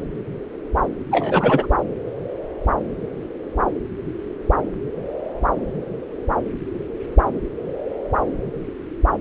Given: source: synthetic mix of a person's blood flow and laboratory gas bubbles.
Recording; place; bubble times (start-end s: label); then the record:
Doppler ultrasound of blood flow; subclavian vein
1.11-1.66 s: bubbles
From the record:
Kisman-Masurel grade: 113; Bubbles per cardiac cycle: 1 to 2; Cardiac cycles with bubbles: 1 to 10%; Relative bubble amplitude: loud (0.450 to 0.775); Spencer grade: 1 (occasional bubble signal discernible with the cardiac motion signal, with majority of cardiac periods free of bubbles); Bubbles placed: anywhere in the cardiac cycle